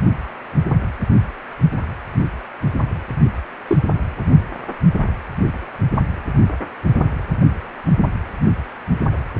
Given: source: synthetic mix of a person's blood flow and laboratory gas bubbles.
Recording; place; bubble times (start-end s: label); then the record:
Doppler ultrasound of blood flow; precordium
3.68-3.77 s: bubbles
From the record:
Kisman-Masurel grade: 123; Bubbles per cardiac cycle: 1 to 2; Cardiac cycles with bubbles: 10 to 50%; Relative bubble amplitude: loud (0.450 to 0.775); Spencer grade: 2 (many but less than half of the cardiac periods contain bubble signals, singularly or in groups); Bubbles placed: anywhere in the cardiac cycle